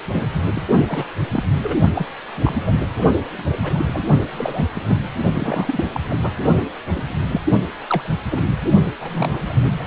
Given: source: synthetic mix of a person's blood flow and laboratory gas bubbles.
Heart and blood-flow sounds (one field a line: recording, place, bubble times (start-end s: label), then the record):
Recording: Doppler ultrasound of blood flow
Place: precordium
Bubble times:
0.05-0.26 s: bubbles
0.55-0.62 s: bubbles
0.88-1.05 s: bubbles
1.31-1.43 s: bubbles
1.62-1.77 s: bubbles
1.94-2.06 s: bubbles
2.35-2.81 s: bubbles
3.38-3.44 s: bubbles
3.62-3.85 s: bubbles
3.93-4.04 s: bubbles
4.21-4.29 s: bubbles
4.32-4.65 s: bubbles
4.75-4.96 s: bubbles
5.34-5.83 s: bubbles
5.94-6.00 s: bubbles
6.08-6.17 s: bubbles
6.22-6.32 s: bubbles
6.91-7.23 s: bubbles
7.29-7.41 s: bubbles
7.88-8.02 s: bubbles
8.30-8.43 s: bubbles
9.01-9.39 s: bubbles
9.49-9.54 s: bubbles
9.62-9.72 s: bubbles
9.79-9.84 s: bubbles
From the record:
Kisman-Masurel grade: 242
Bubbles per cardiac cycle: several, 3 to 8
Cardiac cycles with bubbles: 100%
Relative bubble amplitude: moderate (0.250 to 0.450)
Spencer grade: 3 (all of the cardiac periods contain showers or single bubble signals, but not dominating or overriding the cardiac motion signals)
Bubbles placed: only in the low amplitude regions of the cardiac cycle